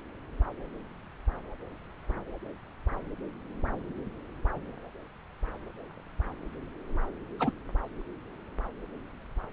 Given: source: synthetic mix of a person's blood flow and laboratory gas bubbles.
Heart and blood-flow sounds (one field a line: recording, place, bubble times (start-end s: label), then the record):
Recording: Doppler ultrasound of blood flow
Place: subclavian vein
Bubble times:
7.39-7.51 s: bubbles
From the record:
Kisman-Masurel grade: 111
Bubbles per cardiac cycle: 1 to 2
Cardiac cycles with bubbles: 1 to 10%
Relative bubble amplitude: barely perceptible (0.100 to 0.250)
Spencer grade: 1 (occasional bubble signal discernible with the cardiac motion signal, with majority of cardiac periods free of bubbles)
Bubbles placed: anywhere in the cardiac cycle